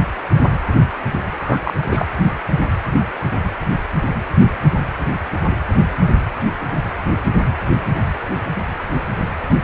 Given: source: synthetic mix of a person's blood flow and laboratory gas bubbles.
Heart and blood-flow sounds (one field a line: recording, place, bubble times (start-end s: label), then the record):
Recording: Doppler ultrasound of blood flow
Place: precordium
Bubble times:
1.38-1.61 s: bubbles
1.64-1.74 s: bubbles
1.88-2.05 s: bubbles
From the record:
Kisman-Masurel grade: 212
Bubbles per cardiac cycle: several, 3 to 8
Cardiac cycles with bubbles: 1 to 10%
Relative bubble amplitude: moderate (0.250 to 0.450)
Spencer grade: 1 (occasional bubble signal discernible with the cardiac motion signal, with majority of cardiac periods free of bubbles)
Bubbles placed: anywhere in the cardiac cycle